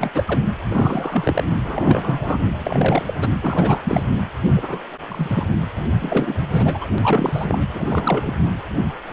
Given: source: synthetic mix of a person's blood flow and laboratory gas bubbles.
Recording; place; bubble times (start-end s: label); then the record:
Doppler ultrasound of blood flow; precordium
0.00-0.10 s: bubbles
0.14-0.40 s: bubbles
0.71-1.44 s: bubbles
1.64-2.38 s: bubbles
2.60-3.03 s: bubbles
3.06-3.14 s: bubbles
3.21-3.29 s: bubbles
3.42-3.81 s: bubbles
3.84-4.03 s: bubbles
4.46-4.79 s: bubbles
5.09-5.46 s: bubbles
6.00-6.88 s: bubbles
6.98-7.58 s: bubbles
7.72-8.33 s: bubbles
From the record:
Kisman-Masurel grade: 333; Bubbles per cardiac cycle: rolling drumbeat, 9 or more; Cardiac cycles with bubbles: 50 to 99%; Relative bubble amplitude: loud (0.450 to 0.775); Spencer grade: 3 (all of the cardiac periods contain showers or single bubble signals, but not dominating or overriding the cardiac motion signals); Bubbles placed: anywhere in the cardiac cycle